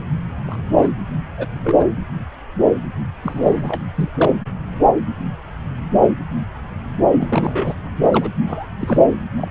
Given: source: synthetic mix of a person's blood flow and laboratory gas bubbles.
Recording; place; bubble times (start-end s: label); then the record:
Doppler ultrasound of blood flow; subclavian vein
0.47-0.57 s: bubbles
0.77-0.91 s: bubbles
1.37-1.49 s: bubbles
1.61-1.76 s: bubbles
1.78-1.86 s: bubbles
3.22-3.83 s: bubbles
3.95-4.09 s: bubbles
4.17-4.35 s: bubbles
7.13-7.74 s: bubbles
8.03-8.29 s: bubbles
8.47-8.67 s: bubbles
8.81-8.99 s: bubbles
9.37-9.48 s: bubbles
From the record:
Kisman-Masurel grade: 232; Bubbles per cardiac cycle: several, 3 to 8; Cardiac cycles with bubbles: 50 to 99%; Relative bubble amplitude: moderate (0.250 to 0.450); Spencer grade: 3 (all of the cardiac periods contain showers or single bubble signals, but not dominating or overriding the cardiac motion signals); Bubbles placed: anywhere in the cardiac cycle